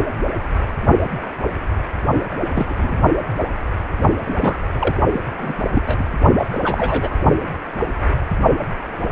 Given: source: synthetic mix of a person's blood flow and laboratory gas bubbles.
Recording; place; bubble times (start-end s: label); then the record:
Doppler ultrasound of blood flow; precordium
2.54-2.66 s: bubbles
2.69-2.98 s: bubbles
4.03-4.09 s: bubbles
4.25-4.57 s: bubbles
4.73-4.96 s: bubbles
5.12-5.21 s: bubbles
5.38-5.53 s: bubbles
5.73-5.82 s: bubbles
5.86-6.04 s: bubbles
6.38-7.16 s: bubbles
From the record:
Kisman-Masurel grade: 222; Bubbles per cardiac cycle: several, 3 to 8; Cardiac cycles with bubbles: 10 to 50%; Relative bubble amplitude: moderate (0.250 to 0.450); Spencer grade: 2 (many but less than half of the cardiac periods contain bubble signals, singularly or in groups); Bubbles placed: only in the low amplitude regions of the cardiac cycle